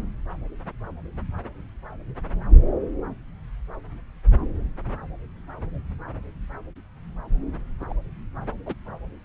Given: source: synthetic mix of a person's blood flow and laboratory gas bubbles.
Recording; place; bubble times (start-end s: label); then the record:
Doppler ultrasound of blood flow; subclavian vein
7.81-7.85 s: bubbles
7.89-7.94 s: bubbles
8.66-8.75 s: bubbles
From the record:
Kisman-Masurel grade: 211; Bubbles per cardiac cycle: several, 3 to 8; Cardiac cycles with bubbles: 1 to 10%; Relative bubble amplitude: barely perceptible (0.100 to 0.250); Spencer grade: 1 (occasional bubble signal discernible with the cardiac motion signal, with majority of cardiac periods free of bubbles); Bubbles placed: anywhere in the cardiac cycle